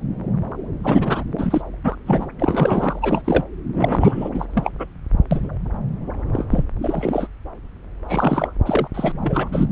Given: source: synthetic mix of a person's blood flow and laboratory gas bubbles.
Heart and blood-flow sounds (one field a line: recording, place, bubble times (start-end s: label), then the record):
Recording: Doppler ultrasound of blood flow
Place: subclavian vein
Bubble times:
0.83-1.24 s: bubbles
1.38-1.61 s: bubbles
1.83-1.96 s: bubbles
2.06-2.26 s: bubbles
2.39-3.22 s: bubbles
3.24-3.45 s: bubbles
3.74-4.29 s: bubbles
4.32-4.46 s: bubbles
4.54-4.72 s: bubbles
4.79-4.86 s: bubbles
5.31-5.48 s: bubbles
6.33-6.45 s: bubbles
6.52-6.65 s: bubbles
6.82-7.28 s: bubbles
8.08-8.48 s: bubbles
8.65-8.88 s: bubbles
8.94-9.13 s: bubbles
9.22-9.47 s: bubbles
9.52-9.65 s: bubbles
From the record:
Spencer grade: 3 (all of the cardiac periods contain showers or single bubble signals, but not dominating or overriding the cardiac motion signals)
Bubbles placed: anywhere in the cardiac cycle